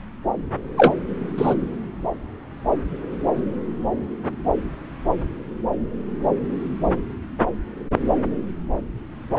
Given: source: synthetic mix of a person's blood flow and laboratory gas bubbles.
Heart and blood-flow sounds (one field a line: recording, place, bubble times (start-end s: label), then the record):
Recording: Doppler ultrasound of blood flow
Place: subclavian vein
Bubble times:
0.77-0.95 s: bubbles
1.36-1.55 s: bubbles
From the record:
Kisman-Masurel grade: 113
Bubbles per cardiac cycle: 1 to 2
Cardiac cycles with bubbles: 1 to 10%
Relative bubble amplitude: loud (0.450 to 0.775)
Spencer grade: 1 (occasional bubble signal discernible with the cardiac motion signal, with majority of cardiac periods free of bubbles)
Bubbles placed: anywhere in the cardiac cycle